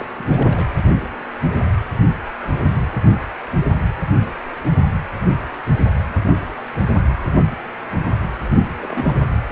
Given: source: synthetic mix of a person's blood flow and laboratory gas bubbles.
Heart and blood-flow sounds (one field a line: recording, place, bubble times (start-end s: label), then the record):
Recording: Doppler ultrasound of blood flow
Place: precordium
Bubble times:
0.00-0.05 s: bubbles
0.20-0.67 s: bubbles
8.83-8.86 s: bubbles
8.88-9.17 s: bubbles
From the record:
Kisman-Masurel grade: 221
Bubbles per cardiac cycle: several, 3 to 8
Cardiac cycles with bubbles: 10 to 50%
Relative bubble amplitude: barely perceptible (0.100 to 0.250)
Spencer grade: 2 (many but less than half of the cardiac periods contain bubble signals, singularly or in groups)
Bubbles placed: anywhere in the cardiac cycle